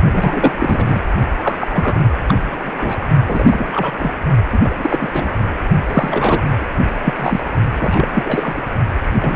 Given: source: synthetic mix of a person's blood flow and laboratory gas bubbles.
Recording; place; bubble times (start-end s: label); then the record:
Doppler ultrasound of blood flow; precordium
0.12-1.02 s: bubbles
1.43-1.55 s: bubbles
1.60-1.68 s: bubbles
1.71-2.05 s: bubbles
2.28-2.34 s: bubbles
2.51-2.71 s: bubbles
2.77-3.08 s: bubbles
3.26-3.93 s: bubbles
3.99-4.13 s: bubbles
4.52-4.60 s: bubbles
4.65-4.75 s: bubbles
4.79-5.39 s: bubbles
5.88-6.42 s: bubbles
6.61-6.66 s: bubbles
7.03-7.41 s: bubbles
7.81-8.67 s: bubbles
9.12-9.36 s: bubbles
From the record:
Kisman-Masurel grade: 343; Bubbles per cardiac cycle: rolling drumbeat, 9 or more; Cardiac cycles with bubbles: 100%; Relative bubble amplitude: loud (0.450 to 0.775); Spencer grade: 3 (all of the cardiac periods contain showers or single bubble signals, but not dominating or overriding the cardiac motion signals); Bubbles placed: only in the low amplitude regions of the cardiac cycle